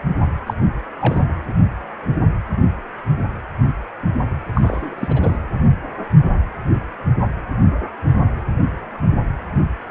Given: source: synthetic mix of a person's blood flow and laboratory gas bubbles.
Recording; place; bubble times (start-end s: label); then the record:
Doppler ultrasound of blood flow; precordium
0.46-0.54 s: bubbles
1.00-1.24 s: bubbles
4.54-4.94 s: bubbles
4.98-5.37 s: bubbles
From the record:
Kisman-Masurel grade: 222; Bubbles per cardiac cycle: several, 3 to 8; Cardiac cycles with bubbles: 10 to 50%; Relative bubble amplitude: moderate (0.250 to 0.450); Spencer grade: 2 (many but less than half of the cardiac periods contain bubble signals, singularly or in groups); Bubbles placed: anywhere in the cardiac cycle